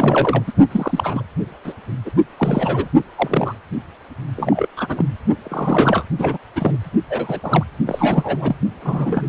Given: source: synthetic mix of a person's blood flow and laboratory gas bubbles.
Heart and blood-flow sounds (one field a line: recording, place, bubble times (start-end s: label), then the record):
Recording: Doppler ultrasound of blood flow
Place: precordium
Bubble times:
0.00-0.43 s: bubbles
0.47-0.53 s: bubbles
0.71-1.23 s: bubbles
1.64-1.74 s: bubbles
2.05-2.11 s: bubbles
2.38-2.88 s: bubbles
3.16-3.54 s: bubbles
4.36-4.67 s: bubbles
4.77-5.06 s: bubbles
5.44-6.04 s: bubbles
6.18-6.38 s: bubbles
6.56-6.78 s: bubbles
7.08-7.40 s: bubbles
7.43-7.64 s: bubbles
7.86-8.55 s: bubbles
8.81-9.27 s: bubbles
From the record:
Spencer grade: 3 (all of the cardiac periods contain showers or single bubble signals, but not dominating or overriding the cardiac motion signals)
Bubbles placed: only in the low amplitude regions of the cardiac cycle